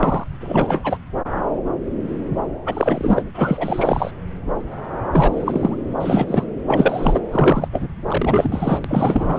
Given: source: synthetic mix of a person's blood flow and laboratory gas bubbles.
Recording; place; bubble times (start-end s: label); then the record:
Doppler ultrasound of blood flow; subclavian vein
0.00-0.24 s: bubbles
0.40-0.97 s: bubbles
2.66-3.22 s: bubbles
3.34-4.11 s: bubbles
5.12-5.76 s: bubbles
6.00-6.44 s: bubbles
6.67-7.20 s: bubbles
7.32-7.68 s: bubbles
7.72-7.88 s: bubbles
8.07-8.79 s: bubbles
8.84-9.39 s: bubbles
From the record:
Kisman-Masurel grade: 333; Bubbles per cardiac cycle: rolling drumbeat, 9 or more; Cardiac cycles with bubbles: 50 to 99%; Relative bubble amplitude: loud (0.450 to 0.775); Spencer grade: 3 (all of the cardiac periods contain showers or single bubble signals, but not dominating or overriding the cardiac motion signals); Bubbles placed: anywhere in the cardiac cycle